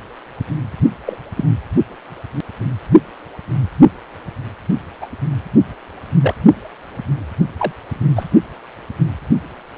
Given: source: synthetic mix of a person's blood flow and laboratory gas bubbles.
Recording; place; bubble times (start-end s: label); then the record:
Doppler ultrasound of blood flow; precordium
1.06-1.17 s: bubbles
1.37-1.45 s: bubbles
5.01-5.06 s: bubbles
6.21-6.34 s: bubbles
7.58-7.72 s: bubbles
8.16-8.24 s: bubbles
From the record:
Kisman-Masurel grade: 122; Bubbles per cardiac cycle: 1 to 2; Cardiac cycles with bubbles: 10 to 50%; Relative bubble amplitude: moderate (0.250 to 0.450); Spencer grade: 2 (many but less than half of the cardiac periods contain bubble signals, singularly or in groups); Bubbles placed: only in the low amplitude regions of the cardiac cycle